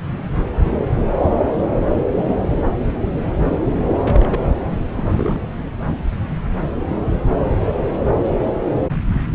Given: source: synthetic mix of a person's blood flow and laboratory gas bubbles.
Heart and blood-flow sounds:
Doppler ultrasound of blood flow; subclavian vein
3.98-4.49 s: bubbles
4.97-5.41 s: bubbles
From the record:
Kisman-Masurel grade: 211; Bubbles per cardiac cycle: several, 3 to 8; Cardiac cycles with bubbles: 1 to 10%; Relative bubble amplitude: barely perceptible (0.100 to 0.250); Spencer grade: 1 (occasional bubble signal discernible with the cardiac motion signal, with majority of cardiac periods free of bubbles); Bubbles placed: anywhere in the cardiac cycle

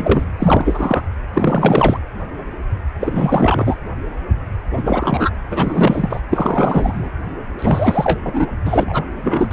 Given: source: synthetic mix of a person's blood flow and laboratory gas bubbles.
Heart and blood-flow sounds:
Doppler ultrasound of blood flow; precordium
0.00-0.28 s: bubbles
0.40-1.01 s: bubbles
1.33-1.99 s: bubbles
3.01-3.77 s: bubbles
4.71-5.30 s: bubbles
5.50-6.21 s: bubbles
6.29-7.11 s: bubbles
7.58-8.19 s: bubbles
8.25-8.47 s: bubbles
8.65-9.05 s: bubbles
9.22-9.53 s: bubbles
From the record:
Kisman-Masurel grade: 333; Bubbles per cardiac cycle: rolling drumbeat, 9 or more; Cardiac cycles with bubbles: 50 to 99%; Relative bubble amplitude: loud (0.450 to 0.775); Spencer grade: 3 (all of the cardiac periods contain showers or single bubble signals, but not dominating or overriding the cardiac motion signals); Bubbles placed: anywhere in the cardiac cycle

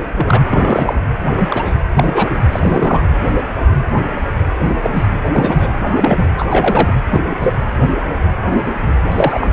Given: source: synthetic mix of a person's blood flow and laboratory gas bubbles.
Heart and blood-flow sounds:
Doppler ultrasound of blood flow; precordium
0.16-0.42 s: bubbles
0.50-1.01 s: bubbles
1.39-1.73 s: bubbles
1.97-2.30 s: bubbles
2.52-3.01 s: bubbles
4.60-4.75 s: bubbles
4.82-4.90 s: bubbles
4.92-5.06 s: bubbles
5.31-5.70 s: bubbles
5.86-6.26 s: bubbles
6.38-6.46 s: bubbles
6.48-6.94 s: bubbles
7.10-7.36 s: bubbles
7.40-7.54 s: bubbles
9.11-9.47 s: bubbles
From the record:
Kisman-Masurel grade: 233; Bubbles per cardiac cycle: several, 3 to 8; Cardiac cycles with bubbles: 50 to 99%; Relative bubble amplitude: loud (0.450 to 0.775); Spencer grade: 3 (all of the cardiac periods contain showers or single bubble signals, but not dominating or overriding the cardiac motion signals); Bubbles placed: anywhere in the cardiac cycle

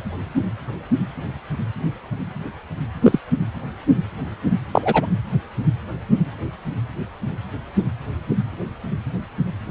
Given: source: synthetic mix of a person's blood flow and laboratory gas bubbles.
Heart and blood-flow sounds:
Doppler ultrasound of blood flow; precordium
3.02-3.19 s: bubbles
4.71-5.07 s: bubbles
From the record:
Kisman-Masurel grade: 123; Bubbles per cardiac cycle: 1 to 2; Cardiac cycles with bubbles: 10 to 50%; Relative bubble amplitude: loud (0.450 to 0.775); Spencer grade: 2 (many but less than half of the cardiac periods contain bubble signals, singularly or in groups); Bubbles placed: anywhere in the cardiac cycle

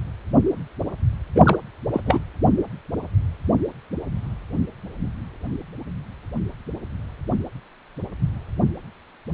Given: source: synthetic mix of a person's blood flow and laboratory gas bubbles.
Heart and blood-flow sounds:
Doppler ultrasound of blood flow; precordium
1.35-1.56 s: bubbles
1.92-2.00 s: bubbles
2.06-2.20 s: bubbles
From the record:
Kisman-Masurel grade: 223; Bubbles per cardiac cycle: several, 3 to 8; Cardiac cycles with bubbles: 10 to 50%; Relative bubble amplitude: loud (0.450 to 0.775); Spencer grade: 2 (many but less than half of the cardiac periods contain bubble signals, singularly or in groups); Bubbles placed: anywhere in the cardiac cycle

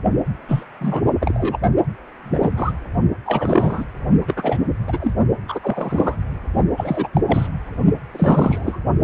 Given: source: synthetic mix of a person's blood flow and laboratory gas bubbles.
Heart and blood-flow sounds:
Doppler ultrasound of blood flow; precordium
0.48-0.63 s: bubbles
0.81-1.03 s: bubbles
1.20-1.58 s: bubbles
2.24-2.50 s: bubbles
2.56-2.72 s: bubbles
3.25-3.85 s: bubbles
4.27-4.58 s: bubbles
4.87-5.13 s: bubbles
5.48-5.59 s: bubbles
5.63-6.17 s: bubbles
6.77-7.09 s: bubbles
7.13-7.21 s: bubbles
7.27-7.47 s: bubbles
8.13-8.79 s: bubbles
From the record:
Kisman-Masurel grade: 243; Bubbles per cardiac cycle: several, 3 to 8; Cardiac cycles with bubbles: 100%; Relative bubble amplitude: loud (0.450 to 0.775); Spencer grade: 3 (all of the cardiac periods contain showers or single bubble signals, but not dominating or overriding the cardiac motion signals); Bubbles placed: only in the low amplitude regions of the cardiac cycle

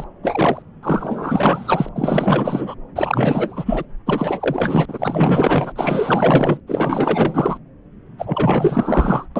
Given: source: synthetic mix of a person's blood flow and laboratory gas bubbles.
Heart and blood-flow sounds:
Doppler ultrasound of blood flow; subclavian vein
0.00-0.07 s: bubbles
0.22-0.62 s: bubbles
0.82-1.89 s: bubbles
1.95-2.75 s: bubbles
2.95-3.85 s: bubbles
4.06-5.73 s: bubbles
5.75-6.60 s: bubbles
6.67-7.57 s: bubbles
8.19-9.26 s: bubbles
9.36-9.40 s: bubbles
From the record:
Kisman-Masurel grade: 444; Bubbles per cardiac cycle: continuous sound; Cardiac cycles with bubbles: 100%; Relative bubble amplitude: maximal (0.775 to 0.999); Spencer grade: 4 (maximum detectable bubble signal sounding continuously throughout systole and diastole of every cardiac period, and overriding the amplitude of the normal cardiac signals); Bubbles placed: anywhere in the cardiac cycle

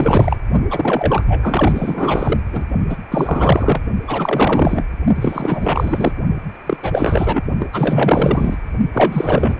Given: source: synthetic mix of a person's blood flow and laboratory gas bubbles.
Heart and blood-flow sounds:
Doppler ultrasound of blood flow; precordium
0.00-0.36 s: bubbles
0.70-2.40 s: bubbles
2.52-2.65 s: bubbles
2.89-2.97 s: bubbles
3.11-3.81 s: bubbles
4.07-4.82 s: bubbles
5.15-6.15 s: bubbles
6.66-6.77 s: bubbles
6.82-7.42 s: bubbles
7.58-7.67 s: bubbles
7.73-8.57 s: bubbles
8.93-9.60 s: bubbles
From the record:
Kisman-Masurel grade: 444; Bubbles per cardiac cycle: continuous sound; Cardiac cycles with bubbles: 100%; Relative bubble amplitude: maximal (0.775 to 0.999); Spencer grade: 4 (maximum detectable bubble signal sounding continuously throughout systole and diastole of every cardiac period, and overriding the amplitude of the normal cardiac signals); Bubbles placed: only in the low amplitude regions of the cardiac cycle

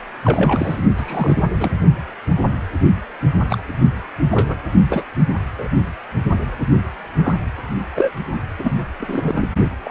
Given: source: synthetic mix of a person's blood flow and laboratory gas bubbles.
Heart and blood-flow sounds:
Doppler ultrasound of blood flow; precordium
0.24-0.82 s: bubbles
0.97-1.42 s: bubbles
1.59-1.71 s: bubbles
3.47-3.58 s: bubbles
4.31-4.56 s: bubbles
4.90-5.03 s: bubbles
5.58-5.67 s: bubbles
7.23-7.36 s: bubbles
7.96-8.12 s: bubbles
8.58-8.70 s: bubbles
8.99-9.48 s: bubbles
9.83-9.91 s: bubbles
From the record:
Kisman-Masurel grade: 232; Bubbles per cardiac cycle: several, 3 to 8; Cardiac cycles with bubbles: 50 to 99%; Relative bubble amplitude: moderate (0.250 to 0.450); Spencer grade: 3 (all of the cardiac periods contain showers or single bubble signals, but not dominating or overriding the cardiac motion signals); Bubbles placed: only in the low amplitude regions of the cardiac cycle

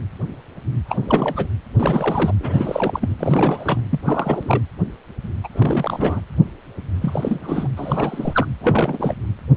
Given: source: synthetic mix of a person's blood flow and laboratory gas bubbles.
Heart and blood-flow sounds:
Doppler ultrasound of blood flow; precordium
0.85-1.48 s: bubbles
1.78-2.32 s: bubbles
2.40-3.15 s: bubbles
3.19-3.83 s: bubbles
3.90-3.99 s: bubbles
4.03-4.62 s: bubbles
5.44-5.48 s: bubbles
5.52-6.21 s: bubbles
7.01-7.68 s: bubbles
7.76-8.47 s: bubbles
8.61-9.16 s: bubbles
From the record:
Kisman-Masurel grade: 332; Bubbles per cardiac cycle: rolling drumbeat, 9 or more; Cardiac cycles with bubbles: 50 to 99%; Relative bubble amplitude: moderate (0.250 to 0.450); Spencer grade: 3 (all of the cardiac periods contain showers or single bubble signals, but not dominating or overriding the cardiac motion signals); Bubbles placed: anywhere in the cardiac cycle

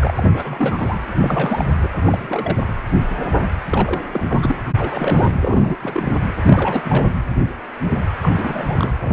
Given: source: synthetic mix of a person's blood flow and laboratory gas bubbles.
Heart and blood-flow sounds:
Doppler ultrasound of blood flow; precordium
0.00-0.98 s: bubbles
1.21-1.65 s: bubbles
1.79-1.88 s: bubbles
1.95-2.63 s: bubbles
3.71-4.01 s: bubbles
4.13-4.56 s: bubbles
4.76-5.33 s: bubbles
5.41-5.77 s: bubbles
5.81-6.15 s: bubbles
6.46-6.82 s: bubbles
6.84-7.12 s: bubbles
8.21-8.94 s: bubbles
9.01-9.13 s: bubbles
From the record:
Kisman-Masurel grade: 332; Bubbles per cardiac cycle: rolling drumbeat, 9 or more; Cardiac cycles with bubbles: 50 to 99%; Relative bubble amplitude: moderate (0.250 to 0.450); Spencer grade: 3 (all of the cardiac periods contain showers or single bubble signals, but not dominating or overriding the cardiac motion signals); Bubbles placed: anywhere in the cardiac cycle

